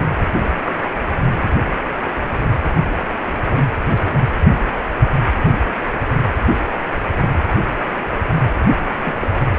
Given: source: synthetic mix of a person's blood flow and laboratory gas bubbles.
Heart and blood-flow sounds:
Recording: Doppler ultrasound of blood flow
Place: precordium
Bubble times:
0.65-0.79 s: bubbles
9.03-9.15 s: bubbles
9.20-9.28 s: bubbles
From the record:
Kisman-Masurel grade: 122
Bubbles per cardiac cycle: 1 to 2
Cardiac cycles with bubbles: 10 to 50%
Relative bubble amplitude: moderate (0.250 to 0.450)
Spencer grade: 2 (many but less than half of the cardiac periods contain bubble signals, singularly or in groups)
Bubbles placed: anywhere in the cardiac cycle

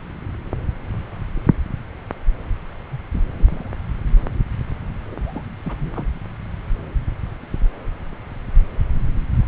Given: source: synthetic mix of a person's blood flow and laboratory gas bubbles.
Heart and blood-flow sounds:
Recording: Doppler ultrasound of blood flow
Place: subclavian vein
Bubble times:
2.92-2.98 s: bubbles
3.12-3.22 s: bubbles
3.38-3.69 s: bubbles
5.11-5.15 s: bubbles
5.21-5.43 s: bubbles
5.64-6.06 s: bubbles
From the record:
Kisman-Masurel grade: 221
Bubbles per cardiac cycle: several, 3 to 8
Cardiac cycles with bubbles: 10 to 50%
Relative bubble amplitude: barely perceptible (0.100 to 0.250)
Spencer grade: 2 (many but less than half of the cardiac periods contain bubble signals, singularly or in groups)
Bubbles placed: anywhere in the cardiac cycle

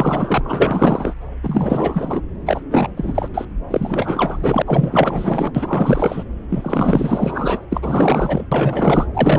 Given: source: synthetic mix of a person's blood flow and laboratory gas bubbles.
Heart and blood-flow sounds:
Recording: Doppler ultrasound of blood flow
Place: subclavian vein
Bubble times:
0.00-1.14 s: bubbles
1.42-2.21 s: bubbles
2.46-2.61 s: bubbles
2.71-2.88 s: bubbles
2.96-3.28 s: bubbles
3.34-3.45 s: bubbles
3.70-4.62 s: bubbles
4.66-5.52 s: bubbles
5.54-6.24 s: bubbles
6.50-7.66 s: bubbles
7.71-8.47 s: bubbles
8.52-9.06 s: bubbles
9.13-9.39 s: bubbles
From the record:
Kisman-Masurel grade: 444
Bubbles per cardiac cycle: continuous sound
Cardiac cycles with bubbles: 100%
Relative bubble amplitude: maximal (0.775 to 0.999)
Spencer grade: 4 (maximum detectable bubble signal sounding continuously throughout systole and diastole of every cardiac period, and overriding the amplitude of the normal cardiac signals)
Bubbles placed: anywhere in the cardiac cycle

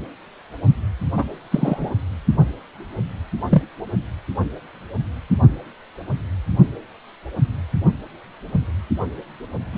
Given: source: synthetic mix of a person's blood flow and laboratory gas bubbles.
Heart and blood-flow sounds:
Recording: Doppler ultrasound of blood flow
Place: precordium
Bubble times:
1.16-1.24 s: bubbles
1.51-1.91 s: bubbles
3.49-3.62 s: bubbles
9.72-9.78 s: bubbles
From the record:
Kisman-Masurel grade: 123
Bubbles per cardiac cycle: 1 to 2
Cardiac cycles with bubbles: 10 to 50%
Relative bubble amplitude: loud (0.450 to 0.775)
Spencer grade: 2 (many but less than half of the cardiac periods contain bubble signals, singularly or in groups)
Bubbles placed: only in the low amplitude regions of the cardiac cycle

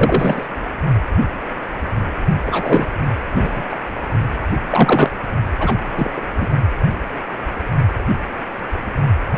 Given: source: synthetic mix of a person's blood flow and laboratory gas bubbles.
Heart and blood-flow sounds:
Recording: Doppler ultrasound of blood flow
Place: precordium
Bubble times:
0.00-0.47 s: bubbles
2.46-2.89 s: bubbles
3.35-3.66 s: bubbles
3.69-3.76 s: bubbles
4.68-5.10 s: bubbles
5.59-5.75 s: bubbles
5.97-6.10 s: bubbles
6.14-6.21 s: bubbles
6.37-6.46 s: bubbles
From the record:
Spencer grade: 2 (many but less than half of the cardiac periods contain bubble signals, singularly or in groups)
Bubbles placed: only in the low amplitude regions of the cardiac cycle

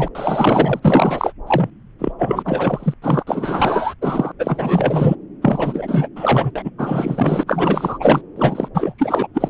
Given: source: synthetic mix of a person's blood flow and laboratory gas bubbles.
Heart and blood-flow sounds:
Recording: Doppler ultrasound of blood flow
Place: subclavian vein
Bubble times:
0.00-0.10 s: bubbles
0.15-1.32 s: bubbles
1.47-1.71 s: bubbles
1.99-2.12 s: bubbles
2.18-2.94 s: bubbles
3.02-3.24 s: bubbles
3.26-3.94 s: bubbles
4.01-4.32 s: bubbles
4.39-5.16 s: bubbles
5.42-6.08 s: bubbles
6.16-6.51 s: bubbles
6.55-6.71 s: bubbles
6.78-7.44 s: bubbles
7.46-8.21 s: bubbles
8.36-8.68 s: bubbles
8.74-8.94 s: bubbles
8.98-9.27 s: bubbles
9.34-9.50 s: bubbles
From the record:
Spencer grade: 4 (maximum detectable bubble signal sounding continuously throughout systole and diastole of every cardiac period, and overriding the amplitude of the normal cardiac signals)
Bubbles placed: anywhere in the cardiac cycle

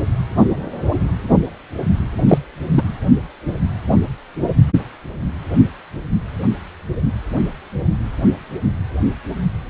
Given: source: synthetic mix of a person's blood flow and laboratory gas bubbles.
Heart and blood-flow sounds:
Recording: Doppler ultrasound of blood flow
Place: precordium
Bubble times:
2.27-2.38 s: bubbles
2.77-2.83 s: bubbles
From the record:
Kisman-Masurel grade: 113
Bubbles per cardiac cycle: 1 to 2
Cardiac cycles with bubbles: 1 to 10%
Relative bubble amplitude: loud (0.450 to 0.775)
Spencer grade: 1 (occasional bubble signal discernible with the cardiac motion signal, with majority of cardiac periods free of bubbles)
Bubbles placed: anywhere in the cardiac cycle

